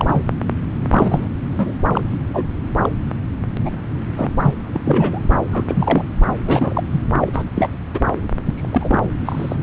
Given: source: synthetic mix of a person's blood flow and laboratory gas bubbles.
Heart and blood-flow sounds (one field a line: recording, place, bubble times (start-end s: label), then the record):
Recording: Doppler ultrasound of blood flow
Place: subclavian vein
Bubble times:
0.00-0.21 s: bubbles
0.91-1.28 s: bubbles
1.52-1.74 s: bubbles
1.91-2.01 s: bubbles
2.33-2.45 s: bubbles
2.81-2.90 s: bubbles
3.65-3.70 s: bubbles
4.16-4.33 s: bubbles
4.41-4.54 s: bubbles
4.73-4.82 s: bubbles
4.85-5.20 s: bubbles
5.51-5.64 s: bubbles
5.68-6.05 s: bubbles
6.46-6.83 s: bubbles
6.91-7.01 s: bubbles
7.20-7.42 s: bubbles
7.55-7.69 s: bubbles
7.94-8.00 s: bubbles
8.45-8.99 s: bubbles
9.02-9.09 s: bubbles
9.25-9.56 s: bubbles
From the record:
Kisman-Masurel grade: 242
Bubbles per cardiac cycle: several, 3 to 8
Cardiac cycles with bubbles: 100%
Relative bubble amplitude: moderate (0.250 to 0.450)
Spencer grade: 3 (all of the cardiac periods contain showers or single bubble signals, but not dominating or overriding the cardiac motion signals)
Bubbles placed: anywhere in the cardiac cycle